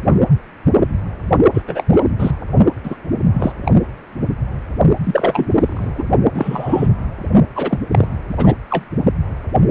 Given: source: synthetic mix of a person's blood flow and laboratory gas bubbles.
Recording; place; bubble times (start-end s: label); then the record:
Doppler ultrasound of blood flow; precordium
1.54-1.62 s: bubbles
1.67-1.85 s: bubbles
1.90-2.03 s: bubbles
2.18-2.35 s: bubbles
2.83-2.96 s: bubbles
3.32-3.52 s: bubbles
3.65-3.72 s: bubbles
5.04-5.50 s: bubbles
5.54-5.92 s: bubbles
5.95-6.05 s: bubbles
6.34-6.89 s: bubbles
7.55-7.79 s: bubbles
7.91-8.07 s: bubbles
8.29-8.54 s: bubbles
8.70-8.85 s: bubbles
From the record:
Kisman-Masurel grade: 233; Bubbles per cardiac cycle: several, 3 to 8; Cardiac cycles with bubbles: 50 to 99%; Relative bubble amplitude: loud (0.450 to 0.775); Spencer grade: 3 (all of the cardiac periods contain showers or single bubble signals, but not dominating or overriding the cardiac motion signals); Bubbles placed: only in the low amplitude regions of the cardiac cycle